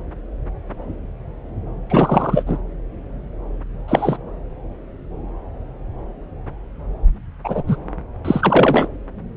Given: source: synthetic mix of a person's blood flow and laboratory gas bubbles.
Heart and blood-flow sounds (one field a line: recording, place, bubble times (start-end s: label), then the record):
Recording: Doppler ultrasound of blood flow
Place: subclavian vein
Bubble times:
1.90-2.43 s: bubbles
2.46-2.58 s: bubbles
3.88-4.17 s: bubbles
7.44-7.63 s: bubbles
7.67-7.76 s: bubbles
8.24-8.88 s: bubbles
From the record:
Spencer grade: 2 (many but less than half of the cardiac periods contain bubble signals, singularly or in groups)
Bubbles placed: anywhere in the cardiac cycle